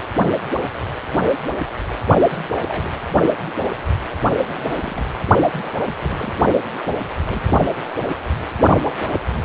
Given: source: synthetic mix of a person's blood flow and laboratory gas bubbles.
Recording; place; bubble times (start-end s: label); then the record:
Doppler ultrasound of blood flow; precordium
2.29-2.39 s: bubbles
2.64-3.01 s: bubbles
4.45-5.21 s: bubbles
5.42-5.96 s: bubbles
6.03-6.38 s: bubbles
6.83-6.99 s: bubbles
7.21-7.42 s: bubbles
From the record:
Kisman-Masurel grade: 221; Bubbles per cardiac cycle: several, 3 to 8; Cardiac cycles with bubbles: 10 to 50%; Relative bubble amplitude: barely perceptible (0.100 to 0.250); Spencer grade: 2 (many but less than half of the cardiac periods contain bubble signals, singularly or in groups); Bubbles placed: only in the low amplitude regions of the cardiac cycle